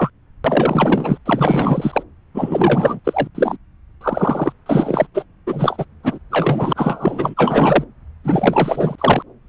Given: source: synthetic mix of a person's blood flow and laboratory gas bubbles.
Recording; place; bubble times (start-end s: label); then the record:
Doppler ultrasound of blood flow; subclavian vein
0.00-0.10 s: bubbles
0.44-1.18 s: bubbles
1.26-2.03 s: bubbles
2.34-2.99 s: bubbles
3.04-3.27 s: bubbles
3.34-3.57 s: bubbles
4.00-4.52 s: bubbles
4.66-5.07 s: bubbles
5.14-5.24 s: bubbles
5.46-5.85 s: bubbles
6.03-6.18 s: bubbles
6.31-7.34 s: bubbles
7.37-7.84 s: bubbles
8.24-8.96 s: bubbles
8.98-9.22 s: bubbles
From the record:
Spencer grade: 4 (maximum detectable bubble signal sounding continuously throughout systole and diastole of every cardiac period, and overriding the amplitude of the normal cardiac signals); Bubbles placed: anywhere in the cardiac cycle